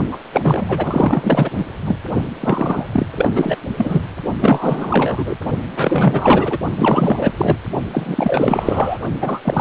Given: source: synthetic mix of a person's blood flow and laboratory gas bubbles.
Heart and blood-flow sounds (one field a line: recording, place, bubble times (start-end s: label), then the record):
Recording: Doppler ultrasound of blood flow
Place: precordium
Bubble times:
0.11-0.18 s: bubbles
0.32-1.50 s: bubbles
1.56-1.66 s: bubbles
1.85-1.96 s: bubbles
2.40-2.85 s: bubbles
2.92-3.06 s: bubbles
3.16-3.32 s: bubbles
3.34-3.58 s: bubbles
3.77-4.01 s: bubbles
4.41-5.38 s: bubbles
5.76-6.58 s: bubbles
6.77-7.31 s: bubbles
7.37-7.58 s: bubbles
7.92-8.99 s: bubbles
9.21-9.40 s: bubbles
9.43-9.61 s: bubbles
From the record:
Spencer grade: 4 (maximum detectable bubble signal sounding continuously throughout systole and diastole of every cardiac period, and overriding the amplitude of the normal cardiac signals)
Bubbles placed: only in the low amplitude regions of the cardiac cycle